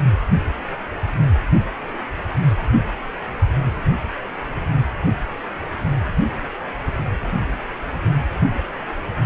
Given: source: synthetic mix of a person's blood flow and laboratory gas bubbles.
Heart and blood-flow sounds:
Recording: Doppler ultrasound of blood flow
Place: precordium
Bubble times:
no bubbles
From the record:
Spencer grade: 0 (complete lack of bubble signals)

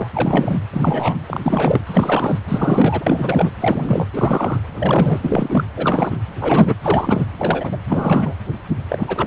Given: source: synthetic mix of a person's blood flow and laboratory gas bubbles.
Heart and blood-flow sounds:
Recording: Doppler ultrasound of blood flow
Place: precordium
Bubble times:
0.00-0.10 s: bubbles
0.13-0.58 s: bubbles
0.72-1.17 s: bubbles
1.27-1.83 s: bubbles
1.87-2.39 s: bubbles
2.48-3.52 s: bubbles
3.60-4.07 s: bubbles
4.13-4.60 s: bubbles
4.76-5.19 s: bubbles
5.22-5.64 s: bubbles
5.76-6.17 s: bubbles
6.40-6.75 s: bubbles
6.82-7.25 s: bubbles
7.38-7.77 s: bubbles
7.87-8.35 s: bubbles
8.89-9.27 s: bubbles
From the record:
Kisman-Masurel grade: 343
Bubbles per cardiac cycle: rolling drumbeat, 9 or more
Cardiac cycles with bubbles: 100%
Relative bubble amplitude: loud (0.450 to 0.775)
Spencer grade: 3 (all of the cardiac periods contain showers or single bubble signals, but not dominating or overriding the cardiac motion signals)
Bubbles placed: anywhere in the cardiac cycle

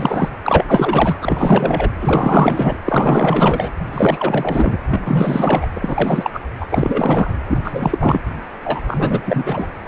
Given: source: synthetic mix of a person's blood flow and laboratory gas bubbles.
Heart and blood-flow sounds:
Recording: Doppler ultrasound of blood flow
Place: precordium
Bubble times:
0.00-0.30 s: bubbles
0.44-1.17 s: bubbles
1.21-1.90 s: bubbles
2.00-2.76 s: bubbles
2.84-3.70 s: bubbles
3.90-4.78 s: bubbles
4.87-5.67 s: bubbles
5.74-5.79 s: bubbles
5.81-6.30 s: bubbles
6.33-6.41 s: bubbles
6.60-6.66 s: bubbles
6.70-7.30 s: bubbles
7.49-7.60 s: bubbles
7.64-8.22 s: bubbles
8.64-8.81 s: bubbles
8.87-9.22 s: bubbles
9.25-9.71 s: bubbles
9.86-9.88 s: bubbles
From the record:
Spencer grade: 4 (maximum detectable bubble signal sounding continuously throughout systole and diastole of every cardiac period, and overriding the amplitude of the normal cardiac signals)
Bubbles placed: anywhere in the cardiac cycle

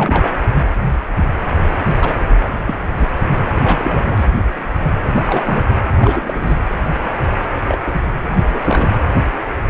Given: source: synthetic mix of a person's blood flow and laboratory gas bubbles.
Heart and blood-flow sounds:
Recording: Doppler ultrasound of blood flow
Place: precordium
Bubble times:
0.00-0.34 s: bubbles
1.85-1.96 s: bubbles
2.02-2.15 s: bubbles
2.42-2.52 s: bubbles
2.66-2.75 s: bubbles
2.97-3.06 s: bubbles
3.54-4.25 s: bubbles
5.15-5.22 s: bubbles
5.27-5.43 s: bubbles
5.46-5.63 s: bubbles
5.96-6.58 s: bubbles
7.67-7.78 s: bubbles
7.85-8.00 s: bubbles
8.49-8.59 s: bubbles
8.62-8.97 s: bubbles
From the record:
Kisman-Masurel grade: 232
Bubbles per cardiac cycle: several, 3 to 8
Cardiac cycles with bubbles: 50 to 99%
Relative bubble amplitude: moderate (0.250 to 0.450)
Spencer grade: 3 (all of the cardiac periods contain showers or single bubble signals, but not dominating or overriding the cardiac motion signals)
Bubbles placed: anywhere in the cardiac cycle

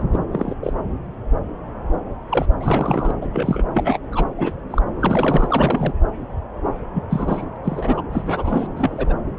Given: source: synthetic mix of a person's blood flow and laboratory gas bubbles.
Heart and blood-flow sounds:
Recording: Doppler ultrasound of blood flow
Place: subclavian vein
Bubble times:
0.00-0.02 s: bubbles
0.12-0.18 s: bubbles
0.32-0.55 s: bubbles
0.61-0.73 s: bubbles
2.29-2.46 s: bubbles
2.60-3.14 s: bubbles
3.21-3.27 s: bubbles
3.30-3.64 s: bubbles
3.74-3.99 s: bubbles
4.12-4.25 s: bubbles
4.38-4.52 s: bubbles
4.71-4.82 s: bubbles
5.00-5.93 s: bubbles
6.94-7.46 s: bubbles
7.55-7.58 s: bubbles
7.63-8.01 s: bubbles
8.09-8.67 s: bubbles
8.75-9.13 s: bubbles
From the record:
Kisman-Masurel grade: 232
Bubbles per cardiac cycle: several, 3 to 8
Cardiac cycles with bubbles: 50 to 99%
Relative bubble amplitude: moderate (0.250 to 0.450)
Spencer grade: 3 (all of the cardiac periods contain showers or single bubble signals, but not dominating or overriding the cardiac motion signals)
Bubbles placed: anywhere in the cardiac cycle

